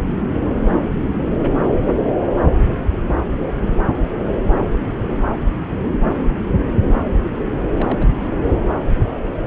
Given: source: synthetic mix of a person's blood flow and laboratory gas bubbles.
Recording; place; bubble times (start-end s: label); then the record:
Doppler ultrasound of blood flow; subclavian vein
7.74-8.38 s: bubbles
From the record:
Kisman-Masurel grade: 211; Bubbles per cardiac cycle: several, 3 to 8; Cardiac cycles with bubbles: 1 to 10%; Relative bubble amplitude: barely perceptible (0.100 to 0.250); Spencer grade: 1 (occasional bubble signal discernible with the cardiac motion signal, with majority of cardiac periods free of bubbles); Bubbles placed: anywhere in the cardiac cycle